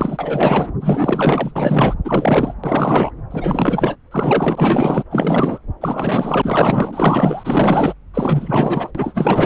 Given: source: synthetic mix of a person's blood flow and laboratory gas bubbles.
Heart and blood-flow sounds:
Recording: Doppler ultrasound of blood flow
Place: subclavian vein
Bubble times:
0.00-0.68 s: bubbles
0.81-1.52 s: bubbles
1.56-1.94 s: bubbles
2.04-2.54 s: bubbles
2.63-3.10 s: bubbles
3.30-3.96 s: bubbles
4.11-5.04 s: bubbles
5.10-5.58 s: bubbles
5.80-7.94 s: bubbles
8.13-8.91 s: bubbles
8.95-9.46 s: bubbles
From the record:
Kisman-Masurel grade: 444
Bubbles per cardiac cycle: continuous sound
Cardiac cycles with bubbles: 100%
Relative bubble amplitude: maximal (0.775 to 0.999)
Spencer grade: 4 (maximum detectable bubble signal sounding continuously throughout systole and diastole of every cardiac period, and overriding the amplitude of the normal cardiac signals)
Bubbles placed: anywhere in the cardiac cycle

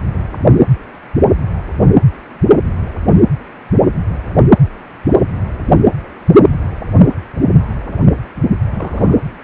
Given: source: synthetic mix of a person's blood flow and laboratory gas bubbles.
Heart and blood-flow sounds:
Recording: Doppler ultrasound of blood flow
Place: precordium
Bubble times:
8.74-9.18 s: bubbles
9.35-9.43 s: bubbles
From the record:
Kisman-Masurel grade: 121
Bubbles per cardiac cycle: 1 to 2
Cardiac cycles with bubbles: 10 to 50%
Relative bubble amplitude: barely perceptible (0.100 to 0.250)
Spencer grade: 2 (many but less than half of the cardiac periods contain bubble signals, singularly or in groups)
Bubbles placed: anywhere in the cardiac cycle

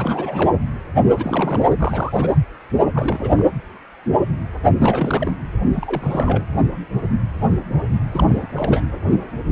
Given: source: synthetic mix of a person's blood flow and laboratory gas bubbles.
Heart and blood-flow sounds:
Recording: Doppler ultrasound of blood flow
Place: precordium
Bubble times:
0.00-0.52 s: bubbles
1.15-1.65 s: bubbles
1.78-2.38 s: bubbles
2.94-3.45 s: bubbles
4.79-5.33 s: bubbles
5.74-6.45 s: bubbles
8.11-8.82 s: bubbles
From the record:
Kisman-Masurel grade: 332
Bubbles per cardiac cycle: rolling drumbeat, 9 or more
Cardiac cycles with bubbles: 50 to 99%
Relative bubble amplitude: moderate (0.250 to 0.450)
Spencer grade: 3 (all of the cardiac periods contain showers or single bubble signals, but not dominating or overriding the cardiac motion signals)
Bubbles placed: anywhere in the cardiac cycle

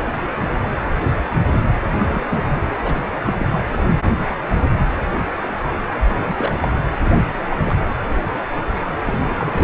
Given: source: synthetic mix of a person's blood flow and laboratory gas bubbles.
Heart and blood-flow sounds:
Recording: Doppler ultrasound of blood flow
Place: precordium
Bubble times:
1.98-2.26 s: bubbles
2.29-2.68 s: bubbles
2.81-2.94 s: bubbles
3.26-3.60 s: bubbles
6.17-6.35 s: bubbles
6.38-6.79 s: bubbles
7.04-7.11 s: bubbles
7.48-7.75 s: bubbles
9.04-9.19 s: bubbles
9.26-9.64 s: bubbles
From the record:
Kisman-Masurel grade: 221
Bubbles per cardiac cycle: several, 3 to 8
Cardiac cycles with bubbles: 10 to 50%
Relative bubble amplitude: barely perceptible (0.100 to 0.250)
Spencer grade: 2 (many but less than half of the cardiac periods contain bubble signals, singularly or in groups)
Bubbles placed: anywhere in the cardiac cycle

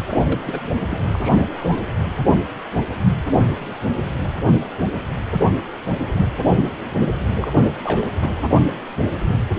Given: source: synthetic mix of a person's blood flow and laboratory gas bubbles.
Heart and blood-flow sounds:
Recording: Doppler ultrasound of blood flow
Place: precordium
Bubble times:
0.08-0.21 s: bubbles
0.24-0.70 s: bubbles
0.81-0.86 s: bubbles
0.89-0.99 s: bubbles
1.15-1.47 s: bubbles
1.54-1.79 s: bubbles
7.36-7.47 s: bubbles
7.83-8.13 s: bubbles
8.20-8.34 s: bubbles
From the record:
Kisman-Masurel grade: 221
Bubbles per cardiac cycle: several, 3 to 8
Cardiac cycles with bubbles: 10 to 50%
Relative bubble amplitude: barely perceptible (0.100 to 0.250)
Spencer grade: 2 (many but less than half of the cardiac periods contain bubble signals, singularly or in groups)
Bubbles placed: anywhere in the cardiac cycle

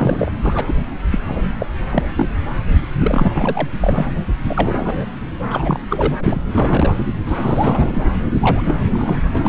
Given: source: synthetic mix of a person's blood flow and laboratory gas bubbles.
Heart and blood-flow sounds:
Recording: Doppler ultrasound of blood flow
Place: subclavian vein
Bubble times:
0.00-0.32 s: bubbles
0.42-0.74 s: bubbles
1.11-1.19 s: bubbles
1.28-1.42 s: bubbles
1.58-1.66 s: bubbles
1.92-2.04 s: bubbles
2.16-2.27 s: bubbles
2.98-3.32 s: bubbles
3.35-3.67 s: bubbles
3.81-4.07 s: bubbles
4.49-5.05 s: bubbles
5.50-5.79 s: bubbles
5.90-6.40 s: bubbles
6.51-7.00 s: bubbles
7.27-8.04 s: bubbles
8.41-9.32 s: bubbles
9.35-9.49 s: bubbles
From the record:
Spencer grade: 3 (all of the cardiac periods contain showers or single bubble signals, but not dominating or overriding the cardiac motion signals)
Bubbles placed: anywhere in the cardiac cycle

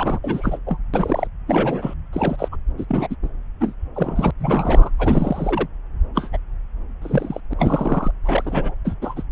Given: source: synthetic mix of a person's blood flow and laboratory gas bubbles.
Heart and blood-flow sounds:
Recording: Doppler ultrasound of blood flow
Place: subclavian vein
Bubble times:
0.00-0.19 s: bubbles
0.24-0.58 s: bubbles
0.66-0.77 s: bubbles
0.94-1.27 s: bubbles
1.47-1.94 s: bubbles
2.12-2.48 s: bubbles
2.52-2.56 s: bubbles
2.77-2.85 s: bubbles
2.89-3.15 s: bubbles
3.23-3.29 s: bubbles
3.60-3.73 s: bubbles
3.94-4.31 s: bubbles
4.39-4.90 s: bubbles
4.98-5.67 s: bubbles
6.14-6.29 s: bubbles
6.32-6.37 s: bubbles
7.01-7.40 s: bubbles
7.49-7.53 s: bubbles
7.58-8.11 s: bubbles
8.24-8.75 s: bubbles
8.84-8.94 s: bubbles
9.01-9.23 s: bubbles
From the record:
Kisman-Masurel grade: 242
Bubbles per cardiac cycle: several, 3 to 8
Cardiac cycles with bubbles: 100%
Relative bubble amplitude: moderate (0.250 to 0.450)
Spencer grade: 3 (all of the cardiac periods contain showers or single bubble signals, but not dominating or overriding the cardiac motion signals)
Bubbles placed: anywhere in the cardiac cycle

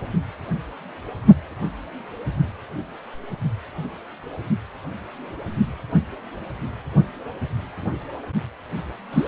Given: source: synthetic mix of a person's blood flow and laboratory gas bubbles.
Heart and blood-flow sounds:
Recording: Doppler ultrasound of blood flow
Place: precordium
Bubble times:
9.12-9.28 s: bubbles
From the record:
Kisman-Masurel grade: 113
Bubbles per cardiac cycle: 1 to 2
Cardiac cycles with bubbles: 1 to 10%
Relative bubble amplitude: loud (0.450 to 0.775)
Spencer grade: 1 (occasional bubble signal discernible with the cardiac motion signal, with majority of cardiac periods free of bubbles)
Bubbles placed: only in the low amplitude regions of the cardiac cycle

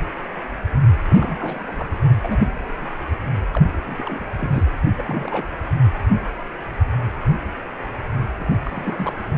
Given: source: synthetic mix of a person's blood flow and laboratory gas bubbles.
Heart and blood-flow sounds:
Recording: Doppler ultrasound of blood flow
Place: precordium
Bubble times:
1.10-1.89 s: bubbles
2.23-2.52 s: bubbles
2.81-2.87 s: bubbles
3.52-3.62 s: bubbles
3.87-4.63 s: bubbles
4.96-5.47 s: bubbles
8.39-8.45 s: bubbles
8.64-9.13 s: bubbles
From the record:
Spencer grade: 2 (many but less than half of the cardiac periods contain bubble signals, singularly or in groups)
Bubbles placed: anywhere in the cardiac cycle

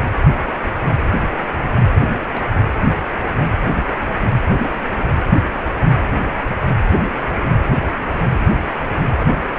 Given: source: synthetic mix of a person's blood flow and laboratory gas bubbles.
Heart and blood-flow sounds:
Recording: Doppler ultrasound of blood flow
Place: precordium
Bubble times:
2.31-2.57 s: bubbles
From the record:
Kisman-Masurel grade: 111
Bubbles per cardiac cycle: 1 to 2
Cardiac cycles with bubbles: 1 to 10%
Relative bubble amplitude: barely perceptible (0.100 to 0.250)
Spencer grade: 1 (occasional bubble signal discernible with the cardiac motion signal, with majority of cardiac periods free of bubbles)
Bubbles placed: anywhere in the cardiac cycle

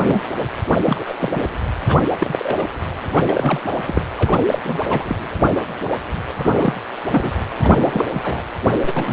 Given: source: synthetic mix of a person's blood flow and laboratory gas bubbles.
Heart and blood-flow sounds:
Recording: Doppler ultrasound of blood flow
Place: precordium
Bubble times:
0.04-0.26 s: bubbles
0.39-0.47 s: bubbles
0.84-1.15 s: bubbles
1.20-1.45 s: bubbles
1.86-2.00 s: bubbles
2.19-2.65 s: bubbles
3.11-3.60 s: bubbles
3.87-4.01 s: bubbles
4.16-4.42 s: bubbles
4.48-4.59 s: bubbles
4.62-4.81 s: bubbles
4.87-5.04 s: bubbles
5.07-5.16 s: bubbles
6.38-6.74 s: bubbles
7.11-7.34 s: bubbles
7.58-8.04 s: bubbles
8.13-8.42 s: bubbles
8.74-8.79 s: bubbles
8.82-8.93 s: bubbles
8.96-9.13 s: bubbles
From the record:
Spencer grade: 3 (all of the cardiac periods contain showers or single bubble signals, but not dominating or overriding the cardiac motion signals)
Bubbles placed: anywhere in the cardiac cycle

